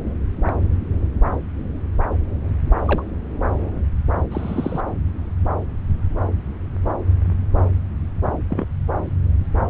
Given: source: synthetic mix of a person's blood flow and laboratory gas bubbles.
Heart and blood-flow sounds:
Doppler ultrasound of blood flow; subclavian vein
0.45-0.56 s: bubbles
2.86-3.03 s: bubbles
4.31-4.80 s: bubbles
8.50-8.65 s: bubbles
From the record:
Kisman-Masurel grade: 122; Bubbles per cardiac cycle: 1 to 2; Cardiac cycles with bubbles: 10 to 50%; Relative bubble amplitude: moderate (0.250 to 0.450); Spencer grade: 2 (many but less than half of the cardiac periods contain bubble signals, singularly or in groups); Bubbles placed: anywhere in the cardiac cycle

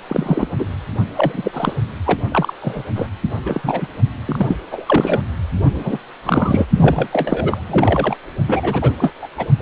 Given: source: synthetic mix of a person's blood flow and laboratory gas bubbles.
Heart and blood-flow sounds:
Doppler ultrasound of blood flow; precordium
0.08-0.48 s: bubbles
0.58-0.65 s: bubbles
1.16-1.74 s: bubbles
2.04-2.20 s: bubbles
2.31-2.54 s: bubbles
2.62-2.84 s: bubbles
2.95-3.08 s: bubbles
3.45-3.61 s: bubbles
3.64-3.88 s: bubbles
4.25-4.56 s: bubbles
4.71-5.24 s: bubbles
5.74-5.97 s: bubbles
6.25-6.65 s: bubbles
6.76-7.08 s: bubbles
7.12-8.15 s: bubbles
8.47-8.92 s: bubbles
8.98-9.11 s: bubbles
9.22-9.28 s: bubbles
9.37-9.46 s: bubbles
9.60-9.62 s: bubbles
From the record:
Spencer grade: 3 (all of the cardiac periods contain showers or single bubble signals, but not dominating or overriding the cardiac motion signals); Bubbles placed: only in the low amplitude regions of the cardiac cycle

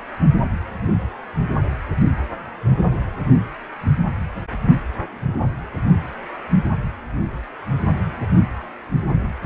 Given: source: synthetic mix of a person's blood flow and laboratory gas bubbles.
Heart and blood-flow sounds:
Doppler ultrasound of blood flow; precordium
no bubbles
From the record:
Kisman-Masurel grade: 000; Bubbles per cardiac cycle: 0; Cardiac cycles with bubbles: 0%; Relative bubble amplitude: no bubbles discernible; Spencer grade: 0 (complete lack of bubble signals)

